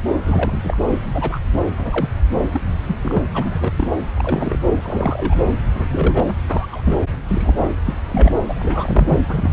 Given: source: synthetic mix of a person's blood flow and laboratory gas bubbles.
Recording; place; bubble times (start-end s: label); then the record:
Doppler ultrasound of blood flow; subclavian vein
0.25-0.78 s: bubbles
0.90-0.99 s: bubbles
1.01-1.40 s: bubbles
1.78-2.09 s: bubbles
2.51-2.61 s: bubbles
2.88-2.95 s: bubbles
3.02-3.22 s: bubbles
3.34-3.71 s: bubbles
3.77-3.90 s: bubbles
4.16-4.62 s: bubbles
4.82-5.38 s: bubbles
5.75-5.85 s: bubbles
5.90-6.31 s: bubbles
6.49-6.67 s: bubbles
6.72-6.82 s: bubbles
6.84-7.02 s: bubbles
7.28-7.54 s: bubbles
7.84-7.93 s: bubbles
8.08-8.31 s: bubbles
8.48-9.17 s: bubbles
9.29-9.53 s: bubbles
From the record:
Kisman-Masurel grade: 242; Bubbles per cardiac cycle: several, 3 to 8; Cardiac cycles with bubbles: 100%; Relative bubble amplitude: moderate (0.250 to 0.450); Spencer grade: 3 (all of the cardiac periods contain showers or single bubble signals, but not dominating or overriding the cardiac motion signals); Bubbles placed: anywhere in the cardiac cycle